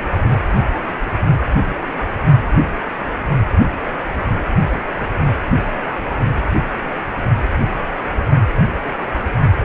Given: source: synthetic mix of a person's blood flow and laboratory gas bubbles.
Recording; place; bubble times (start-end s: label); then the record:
Doppler ultrasound of blood flow; precordium
no bubbles
From the record:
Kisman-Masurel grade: 000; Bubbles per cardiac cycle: 0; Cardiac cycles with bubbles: 0%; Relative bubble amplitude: no bubbles discernible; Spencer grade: 0 (complete lack of bubble signals)